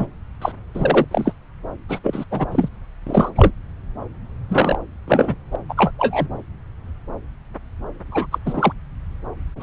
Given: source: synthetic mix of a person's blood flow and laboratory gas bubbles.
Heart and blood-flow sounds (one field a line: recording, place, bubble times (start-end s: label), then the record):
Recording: Doppler ultrasound of blood flow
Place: subclavian vein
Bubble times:
0.00-0.06 s: bubbles
0.41-0.52 s: bubbles
0.74-1.05 s: bubbles
1.11-1.32 s: bubbles
1.89-1.99 s: bubbles
2.04-2.25 s: bubbles
2.31-2.46 s: bubbles
2.52-2.69 s: bubbles
3.06-3.30 s: bubbles
3.35-3.52 s: bubbles
4.50-4.77 s: bubbles
5.08-5.35 s: bubbles
5.52-5.56 s: bubbles
5.69-5.74 s: bubbles
5.77-5.91 s: bubbles
5.98-6.27 s: bubbles
8.11-8.26 s: bubbles
8.31-8.38 s: bubbles
8.46-8.72 s: bubbles
9.59-9.63 s: bubbles
From the record:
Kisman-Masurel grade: 233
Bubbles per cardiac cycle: several, 3 to 8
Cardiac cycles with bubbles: 50 to 99%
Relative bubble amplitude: loud (0.450 to 0.775)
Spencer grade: 3 (all of the cardiac periods contain showers or single bubble signals, but not dominating or overriding the cardiac motion signals)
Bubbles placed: anywhere in the cardiac cycle